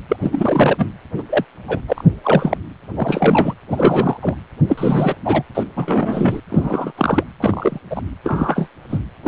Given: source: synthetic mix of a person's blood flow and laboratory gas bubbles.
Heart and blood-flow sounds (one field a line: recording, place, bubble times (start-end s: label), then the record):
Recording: Doppler ultrasound of blood flow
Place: precordium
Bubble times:
0.08-0.16 s: bubbles
0.22-0.87 s: bubbles
1.18-1.23 s: bubbles
1.29-1.45 s: bubbles
1.67-1.80 s: bubbles
1.88-2.04 s: bubbles
2.23-2.57 s: bubbles
2.95-3.54 s: bubbles
3.70-4.17 s: bubbles
4.21-4.34 s: bubbles
4.68-5.16 s: bubbles
5.25-5.43 s: bubbles
5.54-5.64 s: bubbles
5.76-6.41 s: bubbles
6.50-6.92 s: bubbles
6.97-7.24 s: bubbles
7.40-7.79 s: bubbles
7.90-8.02 s: bubbles
8.23-8.68 s: bubbles
8.89-8.98 s: bubbles
9.23-9.28 s: bubbles
From the record:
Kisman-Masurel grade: 243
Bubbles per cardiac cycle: several, 3 to 8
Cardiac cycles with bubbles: 100%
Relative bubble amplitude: loud (0.450 to 0.775)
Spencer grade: 3 (all of the cardiac periods contain showers or single bubble signals, but not dominating or overriding the cardiac motion signals)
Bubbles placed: anywhere in the cardiac cycle